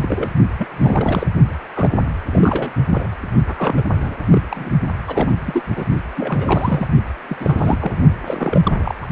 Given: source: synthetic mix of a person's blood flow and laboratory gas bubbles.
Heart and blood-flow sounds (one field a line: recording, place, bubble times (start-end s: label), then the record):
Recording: Doppler ultrasound of blood flow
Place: precordium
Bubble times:
0.00-0.30 s: bubbles
0.58-0.67 s: bubbles
0.71-1.28 s: bubbles
1.75-1.92 s: bubbles
2.31-2.73 s: bubbles
2.89-3.09 s: bubbles
3.47-3.83 s: bubbles
4.01-4.18 s: bubbles
4.30-4.42 s: bubbles
4.49-4.70 s: bubbles
5.07-5.33 s: bubbles
5.46-5.63 s: bubbles
5.76-5.85 s: bubbles
6.16-6.88 s: bubbles
7.29-7.37 s: bubbles
7.40-8.00 s: bubbles
8.26-9.09 s: bubbles
From the record:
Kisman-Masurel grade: 342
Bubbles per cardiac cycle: rolling drumbeat, 9 or more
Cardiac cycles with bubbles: 100%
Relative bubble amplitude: moderate (0.250 to 0.450)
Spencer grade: 3 (all of the cardiac periods contain showers or single bubble signals, but not dominating or overriding the cardiac motion signals)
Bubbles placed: only in the low amplitude regions of the cardiac cycle